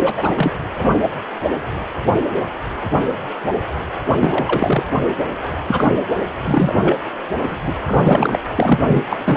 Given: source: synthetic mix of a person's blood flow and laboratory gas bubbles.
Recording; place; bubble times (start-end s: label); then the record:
Doppler ultrasound of blood flow; precordium
0.00-0.52 s: bubbles
0.78-0.89 s: bubbles
4.08-4.83 s: bubbles
5.65-5.93 s: bubbles
6.44-6.75 s: bubbles
6.82-6.96 s: bubbles
7.38-7.59 s: bubbles
7.67-7.73 s: bubbles
7.87-8.39 s: bubbles
8.55-9.04 s: bubbles
9.09-9.16 s: bubbles
9.25-9.37 s: bubbles
From the record:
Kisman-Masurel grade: 333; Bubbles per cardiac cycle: rolling drumbeat, 9 or more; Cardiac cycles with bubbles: 50 to 99%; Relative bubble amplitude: loud (0.450 to 0.775); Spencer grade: 3 (all of the cardiac periods contain showers or single bubble signals, but not dominating or overriding the cardiac motion signals); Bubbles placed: anywhere in the cardiac cycle